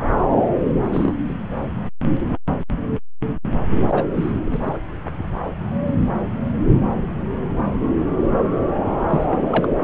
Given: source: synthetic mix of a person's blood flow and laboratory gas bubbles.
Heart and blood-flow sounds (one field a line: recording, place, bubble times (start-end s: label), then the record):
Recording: Doppler ultrasound of blood flow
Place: subclavian vein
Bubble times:
0.83-1.15 s: bubbles
1.28-1.33 s: bubbles
3.89-4.04 s: bubbles
4.14-4.31 s: bubbles
4.45-4.78 s: bubbles
9.10-9.68 s: bubbles
From the record:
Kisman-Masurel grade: 222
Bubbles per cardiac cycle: several, 3 to 8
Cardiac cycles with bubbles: 10 to 50%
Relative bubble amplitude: moderate (0.250 to 0.450)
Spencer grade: 2 (many but less than half of the cardiac periods contain bubble signals, singularly or in groups)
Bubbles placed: anywhere in the cardiac cycle